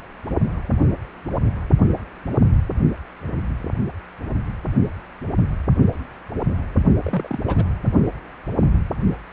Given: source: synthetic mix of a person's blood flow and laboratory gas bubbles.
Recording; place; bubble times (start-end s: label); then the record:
Doppler ultrasound of blood flow; precordium
7.03-7.39 s: bubbles
7.48-7.65 s: bubbles
From the record:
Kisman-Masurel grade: 111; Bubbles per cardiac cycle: 1 to 2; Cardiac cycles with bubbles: 1 to 10%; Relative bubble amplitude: barely perceptible (0.100 to 0.250); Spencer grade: 1 (occasional bubble signal discernible with the cardiac motion signal, with majority of cardiac periods free of bubbles); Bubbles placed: anywhere in the cardiac cycle